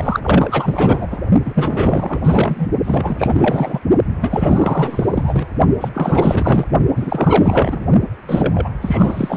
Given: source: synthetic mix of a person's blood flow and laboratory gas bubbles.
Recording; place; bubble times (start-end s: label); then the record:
Doppler ultrasound of blood flow; precordium
0.00-1.08 s: bubbles
1.10-1.18 s: bubbles
1.45-2.21 s: bubbles
2.23-2.69 s: bubbles
2.83-3.79 s: bubbles
4.21-5.46 s: bubbles
5.80-5.90 s: bubbles
5.94-6.65 s: bubbles
6.96-7.86 s: bubbles
8.27-8.69 s: bubbles
8.81-9.37 s: bubbles
From the record:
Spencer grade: 4 (maximum detectable bubble signal sounding continuously throughout systole and diastole of every cardiac period, and overriding the amplitude of the normal cardiac signals); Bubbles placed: only in the low amplitude regions of the cardiac cycle